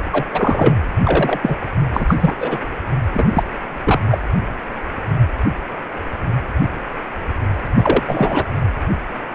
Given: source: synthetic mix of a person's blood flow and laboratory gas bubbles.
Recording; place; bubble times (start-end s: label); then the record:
Doppler ultrasound of blood flow; precordium
0.12-0.25 s: bubbles
0.34-0.77 s: bubbles
1.03-1.56 s: bubbles
1.94-2.15 s: bubbles
2.21-2.36 s: bubbles
2.40-2.57 s: bubbles
3.13-3.44 s: bubbles
3.84-4.00 s: bubbles
4.11-4.18 s: bubbles
7.75-8.03 s: bubbles
8.07-8.45 s: bubbles
From the record:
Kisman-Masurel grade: 233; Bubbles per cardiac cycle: several, 3 to 8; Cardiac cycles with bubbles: 50 to 99%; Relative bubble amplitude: loud (0.450 to 0.775); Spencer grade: 3 (all of the cardiac periods contain showers or single bubble signals, but not dominating or overriding the cardiac motion signals); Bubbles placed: anywhere in the cardiac cycle